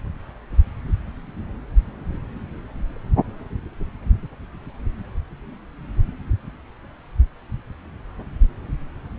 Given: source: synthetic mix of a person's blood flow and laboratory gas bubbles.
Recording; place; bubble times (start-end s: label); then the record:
Doppler ultrasound of blood flow; subclavian vein
no bubbles
From the record:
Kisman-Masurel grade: 000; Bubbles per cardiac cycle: 0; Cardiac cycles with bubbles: 0%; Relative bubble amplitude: no bubbles discernible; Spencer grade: 0 (complete lack of bubble signals)